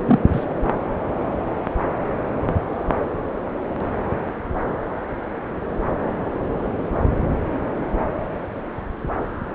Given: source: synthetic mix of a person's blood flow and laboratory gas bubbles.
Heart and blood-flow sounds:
Doppler ultrasound of blood flow; subclavian vein
0.05-0.19 s: bubbles
0.32-0.45 s: bubbles
From the record:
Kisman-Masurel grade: 113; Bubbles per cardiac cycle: 1 to 2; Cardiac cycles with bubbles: 1 to 10%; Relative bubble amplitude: loud (0.450 to 0.775); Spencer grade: 1 (occasional bubble signal discernible with the cardiac motion signal, with majority of cardiac periods free of bubbles); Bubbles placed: anywhere in the cardiac cycle

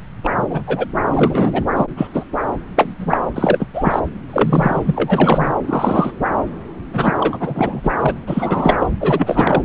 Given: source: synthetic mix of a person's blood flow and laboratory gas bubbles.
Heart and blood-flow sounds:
Doppler ultrasound of blood flow; subclavian vein
0.24-0.30 s: bubbles
0.40-0.64 s: bubbles
0.67-0.86 s: bubbles
1.06-1.65 s: bubbles
1.76-1.88 s: bubbles
1.97-2.08 s: bubbles
2.13-2.25 s: bubbles
2.76-2.95 s: bubbles
2.98-3.17 s: bubbles
3.35-3.67 s: bubbles
3.73-4.00 s: bubbles
4.31-5.54 s: bubbles
5.67-6.12 s: bubbles
6.93-7.15 s: bubbles
7.20-7.37 s: bubbles
7.40-7.92 s: bubbles
7.96-8.14 s: bubbles
8.27-8.87 s: bubbles
9.00-9.62 s: bubbles
From the record:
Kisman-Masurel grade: 243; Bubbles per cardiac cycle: several, 3 to 8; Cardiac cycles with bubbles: 100%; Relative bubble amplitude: loud (0.450 to 0.775); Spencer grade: 3 (all of the cardiac periods contain showers or single bubble signals, but not dominating or overriding the cardiac motion signals); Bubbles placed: anywhere in the cardiac cycle

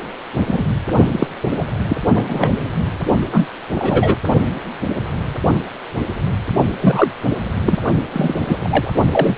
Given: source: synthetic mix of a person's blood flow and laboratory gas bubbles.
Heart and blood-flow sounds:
Doppler ultrasound of blood flow; precordium
0.47-0.65 s: bubbles
1.11-1.27 s: bubbles
1.42-1.48 s: bubbles
1.58-1.65 s: bubbles
1.88-1.96 s: bubbles
2.14-2.71 s: bubbles
3.32-3.47 s: bubbles
3.75-4.18 s: bubbles
6.81-7.12 s: bubbles
7.65-7.79 s: bubbles
8.13-8.91 s: bubbles
9.12-9.35 s: bubbles
From the record:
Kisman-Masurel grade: 233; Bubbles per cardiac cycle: several, 3 to 8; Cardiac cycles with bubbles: 50 to 99%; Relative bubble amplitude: loud (0.450 to 0.775); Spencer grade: 3 (all of the cardiac periods contain showers or single bubble signals, but not dominating or overriding the cardiac motion signals); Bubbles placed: only in the low amplitude regions of the cardiac cycle

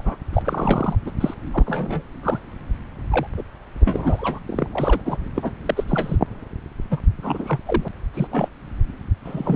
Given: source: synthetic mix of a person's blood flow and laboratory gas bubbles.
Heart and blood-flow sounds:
Doppler ultrasound of blood flow; subclavian vein
0.00-0.15 s: bubbles
0.33-0.95 s: bubbles
1.05-1.11 s: bubbles
1.20-1.34 s: bubbles
1.52-2.02 s: bubbles
2.23-2.38 s: bubbles
3.10-3.27 s: bubbles
3.37-3.43 s: bubbles
3.80-4.39 s: bubbles
4.47-4.67 s: bubbles
4.72-5.01 s: bubbles
5.05-5.17 s: bubbles
5.35-5.51 s: bubbles
5.66-5.84 s: bubbles
5.87-6.17 s: bubbles
6.91-7.00 s: bubbles
7.22-7.59 s: bubbles
7.66-7.88 s: bubbles
8.13-8.48 s: bubbles
9.24-9.56 s: bubbles
From the record:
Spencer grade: 3 (all of the cardiac periods contain showers or single bubble signals, but not dominating or overriding the cardiac motion signals); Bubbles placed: anywhere in the cardiac cycle

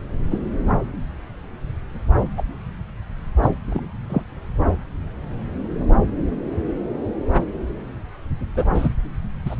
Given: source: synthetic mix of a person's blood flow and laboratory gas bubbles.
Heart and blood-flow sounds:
Doppler ultrasound of blood flow; subclavian vein
0.31-0.39 s: bubbles
2.36-2.44 s: bubbles
3.42-3.52 s: bubbles
3.66-3.81 s: bubbles
4.09-4.22 s: bubbles
8.55-8.64 s: bubbles
8.74-8.88 s: bubbles
9.45-9.55 s: bubbles
From the record:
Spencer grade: 2 (many but less than half of the cardiac periods contain bubble signals, singularly or in groups); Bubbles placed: anywhere in the cardiac cycle

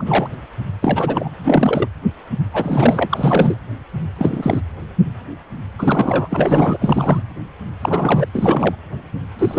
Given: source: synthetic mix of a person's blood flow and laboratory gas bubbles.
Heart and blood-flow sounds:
Doppler ultrasound of blood flow; precordium
0.00-0.28 s: bubbles
0.81-1.29 s: bubbles
1.44-1.88 s: bubbles
2.52-3.08 s: bubbles
3.10-3.57 s: bubbles
4.18-4.61 s: bubbles
5.79-6.78 s: bubbles
6.80-7.23 s: bubbles
7.82-8.26 s: bubbles
8.32-8.75 s: bubbles
9.39-9.59 s: bubbles
From the record:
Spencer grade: 3 (all of the cardiac periods contain showers or single bubble signals, but not dominating or overriding the cardiac motion signals); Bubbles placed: anywhere in the cardiac cycle

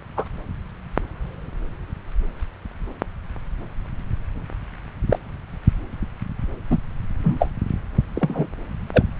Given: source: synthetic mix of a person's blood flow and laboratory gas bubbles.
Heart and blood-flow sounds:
Doppler ultrasound of blood flow; subclavian vein
0.17-0.29 s: bubbles
5.09-5.19 s: bubbles
6.70-6.78 s: bubbles
7.23-7.49 s: bubbles
8.14-8.46 s: bubbles
8.93-9.04 s: bubbles
From the record:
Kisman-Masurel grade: 123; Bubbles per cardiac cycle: 1 to 2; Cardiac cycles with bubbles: 10 to 50%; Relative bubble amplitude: loud (0.450 to 0.775); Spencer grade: 2 (many but less than half of the cardiac periods contain bubble signals, singularly or in groups); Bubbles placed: anywhere in the cardiac cycle

